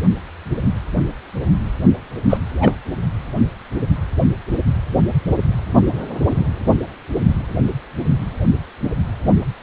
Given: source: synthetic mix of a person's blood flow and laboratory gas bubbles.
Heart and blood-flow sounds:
Doppler ultrasound of blood flow; precordium
2.29-2.38 s: bubbles
2.60-2.73 s: bubbles
From the record:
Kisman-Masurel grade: 213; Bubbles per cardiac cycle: several, 3 to 8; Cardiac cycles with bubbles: 1 to 10%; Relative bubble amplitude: loud (0.450 to 0.775); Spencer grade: 1 (occasional bubble signal discernible with the cardiac motion signal, with majority of cardiac periods free of bubbles); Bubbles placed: only in the low amplitude regions of the cardiac cycle

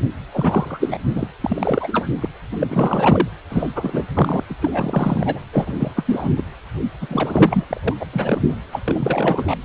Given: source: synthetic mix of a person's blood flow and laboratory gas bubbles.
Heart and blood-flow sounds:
Doppler ultrasound of blood flow; precordium
0.00-0.09 s: bubbles
0.33-0.99 s: bubbles
1.14-1.27 s: bubbles
1.40-2.07 s: bubbles
2.20-2.29 s: bubbles
2.51-3.28 s: bubbles
3.50-3.72 s: bubbles
3.76-4.04 s: bubbles
4.15-4.44 s: bubbles
4.50-4.54 s: bubbles
4.61-5.40 s: bubbles
5.53-5.92 s: bubbles
5.96-6.32 s: bubbles
6.37-6.44 s: bubbles
7.01-7.64 s: bubbles
7.70-7.80 s: bubbles
7.83-7.94 s: bubbles
8.00-8.06 s: bubbles
8.12-8.42 s: bubbles
8.48-8.56 s: bubbles
8.72-8.80 s: bubbles
8.84-9.56 s: bubbles
From the record:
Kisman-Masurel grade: 333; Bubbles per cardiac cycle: rolling drumbeat, 9 or more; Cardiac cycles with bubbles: 50 to 99%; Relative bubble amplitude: loud (0.450 to 0.775); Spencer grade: 3 (all of the cardiac periods contain showers or single bubble signals, but not dominating or overriding the cardiac motion signals); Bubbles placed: anywhere in the cardiac cycle

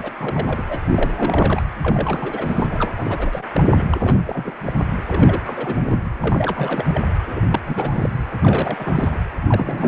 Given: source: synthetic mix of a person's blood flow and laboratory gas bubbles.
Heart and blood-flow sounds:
Doppler ultrasound of blood flow; precordium
0.00-0.11 s: bubbles
0.18-0.63 s: bubbles
0.69-0.81 s: bubbles
0.92-1.12 s: bubbles
1.16-1.62 s: bubbles
1.81-2.67 s: bubbles
2.71-2.90 s: bubbles
2.96-3.44 s: bubbles
3.54-3.84 s: bubbles
3.90-4.54 s: bubbles
4.64-4.73 s: bubbles
5.05-5.42 s: bubbles
5.45-5.76 s: bubbles
5.81-5.99 s: bubbles
6.21-7.04 s: bubbles
7.26-7.40 s: bubbles
7.51-7.61 s: bubbles
7.66-8.10 s: bubbles
8.41-9.21 s: bubbles
9.47-9.88 s: bubbles
From the record:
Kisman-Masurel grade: 332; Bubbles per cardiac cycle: rolling drumbeat, 9 or more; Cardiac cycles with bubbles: 50 to 99%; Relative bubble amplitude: moderate (0.250 to 0.450); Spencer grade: 3 (all of the cardiac periods contain showers or single bubble signals, but not dominating or overriding the cardiac motion signals); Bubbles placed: anywhere in the cardiac cycle

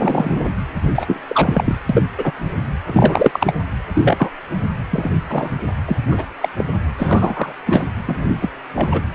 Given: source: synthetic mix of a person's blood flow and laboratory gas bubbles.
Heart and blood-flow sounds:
Doppler ultrasound of blood flow; precordium
0.00-0.46 s: bubbles
0.95-1.21 s: bubbles
1.28-1.79 s: bubbles
1.89-2.02 s: bubbles
2.18-2.31 s: bubbles
2.86-3.53 s: bubbles
3.94-4.30 s: bubbles
4.91-5.11 s: bubbles
5.29-5.50 s: bubbles
5.86-5.96 s: bubbles
6.11-6.25 s: bubbles
6.41-6.49 s: bubbles
6.58-6.65 s: bubbles
6.97-7.53 s: bubbles
7.66-7.85 s: bubbles
8.08-8.27 s: bubbles
8.42-8.49 s: bubbles
8.74-9.02 s: bubbles
From the record:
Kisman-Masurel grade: 233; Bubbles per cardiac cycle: several, 3 to 8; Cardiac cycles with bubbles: 50 to 99%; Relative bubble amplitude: loud (0.450 to 0.775); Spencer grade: 3 (all of the cardiac periods contain showers or single bubble signals, but not dominating or overriding the cardiac motion signals); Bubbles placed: anywhere in the cardiac cycle

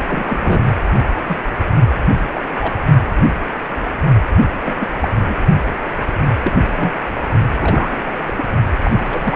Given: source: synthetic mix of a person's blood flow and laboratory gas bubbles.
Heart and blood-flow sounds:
Doppler ultrasound of blood flow; precordium
0.07-0.62 s: bubbles
1.28-1.38 s: bubbles
2.34-2.45 s: bubbles
2.61-2.74 s: bubbles
4.64-4.75 s: bubbles
4.79-4.88 s: bubbles
5.02-5.08 s: bubbles
5.29-5.35 s: bubbles
6.08-6.13 s: bubbles
6.43-6.56 s: bubbles
6.77-6.92 s: bubbles
7.61-8.14 s: bubbles
8.26-8.34 s: bubbles
8.37-8.45 s: bubbles
8.83-9.36 s: bubbles
From the record:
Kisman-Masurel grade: 232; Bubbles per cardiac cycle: several, 3 to 8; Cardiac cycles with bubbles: 50 to 99%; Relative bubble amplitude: moderate (0.250 to 0.450); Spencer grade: 3 (all of the cardiac periods contain showers or single bubble signals, but not dominating or overriding the cardiac motion signals); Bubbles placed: only in the low amplitude regions of the cardiac cycle

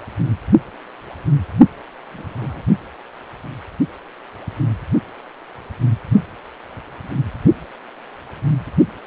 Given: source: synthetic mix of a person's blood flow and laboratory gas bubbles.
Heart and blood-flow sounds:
Doppler ultrasound of blood flow; precordium
2.12-2.23 s: bubbles
2.27-2.61 s: bubbles
From the record:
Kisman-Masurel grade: 121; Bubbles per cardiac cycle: 1 to 2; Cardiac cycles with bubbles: 10 to 50%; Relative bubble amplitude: barely perceptible (0.100 to 0.250); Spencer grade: 2 (many but less than half of the cardiac periods contain bubble signals, singularly or in groups); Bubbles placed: only in the low amplitude regions of the cardiac cycle

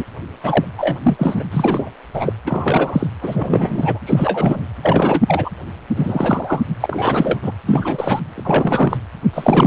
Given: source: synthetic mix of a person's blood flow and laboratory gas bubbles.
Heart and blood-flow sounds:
Doppler ultrasound of blood flow; precordium
0.00-0.03 s: bubbles
0.43-0.65 s: bubbles
0.78-0.98 s: bubbles
1.02-1.43 s: bubbles
1.51-1.92 s: bubbles
2.13-2.32 s: bubbles
2.46-3.07 s: bubbles
3.21-3.99 s: bubbles
4.06-4.67 s: bubbles
4.83-5.21 s: bubbles
5.28-5.50 s: bubbles
5.95-6.62 s: bubbles
6.80-7.39 s: bubbles
7.42-7.52 s: bubbles
7.67-8.20 s: bubbles
8.36-8.97 s: bubbles
9.33-9.67 s: bubbles
From the record:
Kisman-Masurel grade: 343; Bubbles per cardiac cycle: rolling drumbeat, 9 or more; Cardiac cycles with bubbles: 100%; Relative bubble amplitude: loud (0.450 to 0.775); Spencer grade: 3 (all of the cardiac periods contain showers or single bubble signals, but not dominating or overriding the cardiac motion signals); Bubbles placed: anywhere in the cardiac cycle

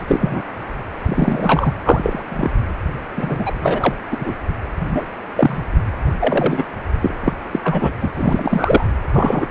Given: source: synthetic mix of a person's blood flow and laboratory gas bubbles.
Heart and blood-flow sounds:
Doppler ultrasound of blood flow; precordium
0.00-0.05 s: bubbles
0.07-0.43 s: bubbles
1.05-1.74 s: bubbles
1.84-2.50 s: bubbles
3.16-3.54 s: bubbles
3.61-3.94 s: bubbles
4.11-4.33 s: bubbles
4.83-5.06 s: bubbles
5.37-5.62 s: bubbles
6.20-6.62 s: bubbles
7.01-7.12 s: bubbles
7.21-7.33 s: bubbles
7.51-7.60 s: bubbles
7.64-7.92 s: bubbles
8.01-8.11 s: bubbles
8.15-8.89 s: bubbles
9.12-9.46 s: bubbles
From the record:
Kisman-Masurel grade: 243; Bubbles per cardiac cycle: several, 3 to 8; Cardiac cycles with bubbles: 100%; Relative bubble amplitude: loud (0.450 to 0.775); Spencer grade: 3 (all of the cardiac periods contain showers or single bubble signals, but not dominating or overriding the cardiac motion signals); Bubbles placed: anywhere in the cardiac cycle

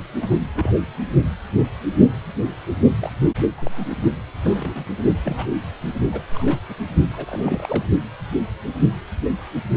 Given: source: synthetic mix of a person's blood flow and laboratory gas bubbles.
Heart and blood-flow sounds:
Doppler ultrasound of blood flow; precordium
0.21-0.28 s: bubbles
0.30-0.34 s: bubbles
0.54-0.81 s: bubbles
3.00-3.11 s: bubbles
3.58-3.86 s: bubbles
3.90-3.96 s: bubbles
4.43-4.86 s: bubbles
5.22-5.46 s: bubbles
6.12-6.22 s: bubbles
6.34-6.58 s: bubbles
6.69-6.75 s: bubbles
7.13-7.86 s: bubbles
From the record:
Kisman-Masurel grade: 221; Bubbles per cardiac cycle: several, 3 to 8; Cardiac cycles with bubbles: 10 to 50%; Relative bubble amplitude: barely perceptible (0.100 to 0.250); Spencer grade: 2 (many but less than half of the cardiac periods contain bubble signals, singularly or in groups); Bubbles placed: only in the low amplitude regions of the cardiac cycle

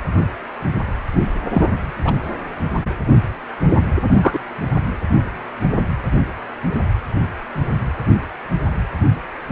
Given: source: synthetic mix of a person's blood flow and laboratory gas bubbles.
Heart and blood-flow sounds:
Doppler ultrasound of blood flow; precordium
1.54-1.66 s: bubbles
2.04-2.14 s: bubbles
4.22-4.38 s: bubbles
From the record:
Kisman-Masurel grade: 123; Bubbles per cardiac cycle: 1 to 2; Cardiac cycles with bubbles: 10 to 50%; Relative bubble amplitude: loud (0.450 to 0.775); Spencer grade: 2 (many but less than half of the cardiac periods contain bubble signals, singularly or in groups); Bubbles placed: anywhere in the cardiac cycle

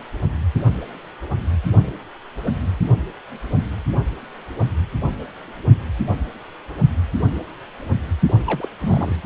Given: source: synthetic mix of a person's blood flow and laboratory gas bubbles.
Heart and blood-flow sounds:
Doppler ultrasound of blood flow; precordium
8.28-8.33 s: bubbles
8.46-8.68 s: bubbles
8.81-9.23 s: bubbles
From the record:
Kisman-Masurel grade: 211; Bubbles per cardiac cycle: several, 3 to 8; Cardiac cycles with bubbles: 1 to 10%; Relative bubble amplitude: barely perceptible (0.100 to 0.250); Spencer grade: 1 (occasional bubble signal discernible with the cardiac motion signal, with majority of cardiac periods free of bubbles); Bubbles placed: only in the low amplitude regions of the cardiac cycle

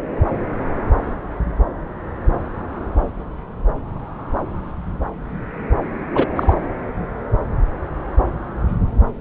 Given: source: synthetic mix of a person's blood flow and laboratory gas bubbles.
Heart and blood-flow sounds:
Doppler ultrasound of blood flow; subclavian vein
6.14-6.25 s: bubbles
6.35-6.54 s: bubbles
From the record:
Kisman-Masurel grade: 213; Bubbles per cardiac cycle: several, 3 to 8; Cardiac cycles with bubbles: 1 to 10%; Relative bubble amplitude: loud (0.450 to 0.775); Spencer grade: 1 (occasional bubble signal discernible with the cardiac motion signal, with majority of cardiac periods free of bubbles); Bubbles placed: anywhere in the cardiac cycle

